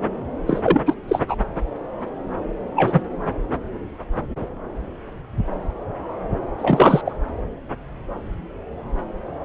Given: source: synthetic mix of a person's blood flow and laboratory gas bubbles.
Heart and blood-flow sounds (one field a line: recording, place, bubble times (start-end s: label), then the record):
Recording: Doppler ultrasound of blood flow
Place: subclavian vein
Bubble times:
0.46-0.81 s: bubbles
0.86-0.95 s: bubbles
1.07-1.21 s: bubbles
1.28-1.35 s: bubbles
2.76-3.02 s: bubbles
6.58-7.02 s: bubbles
7.05-7.16 s: bubbles
From the record:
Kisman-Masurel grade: 223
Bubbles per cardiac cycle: several, 3 to 8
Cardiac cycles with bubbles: 10 to 50%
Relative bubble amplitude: loud (0.450 to 0.775)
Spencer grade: 2 (many but less than half of the cardiac periods contain bubble signals, singularly or in groups)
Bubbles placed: anywhere in the cardiac cycle